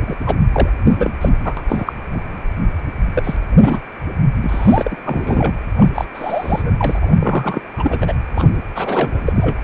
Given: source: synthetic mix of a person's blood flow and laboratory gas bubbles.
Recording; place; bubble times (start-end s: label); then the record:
Doppler ultrasound of blood flow; precordium
0.07-0.15 s: bubbles
0.27-0.35 s: bubbles
0.52-0.69 s: bubbles
0.84-1.12 s: bubbles
1.21-1.29 s: bubbles
1.32-1.63 s: bubbles
1.67-1.93 s: bubbles
2.12-2.38 s: bubbles
3.14-3.35 s: bubbles
3.59-3.79 s: bubbles
4.42-4.97 s: bubbles
5.05-5.54 s: bubbles
5.77-5.90 s: bubbles
5.95-6.05 s: bubbles
6.14-7.61 s: bubbles
7.77-8.14 s: bubbles
8.34-8.49 s: bubbles
8.75-9.19 s: bubbles
9.25-9.61 s: bubbles
From the record:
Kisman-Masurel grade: 333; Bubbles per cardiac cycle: rolling drumbeat, 9 or more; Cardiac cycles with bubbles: 50 to 99%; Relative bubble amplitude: loud (0.450 to 0.775); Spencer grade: 3 (all of the cardiac periods contain showers or single bubble signals, but not dominating or overriding the cardiac motion signals); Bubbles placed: anywhere in the cardiac cycle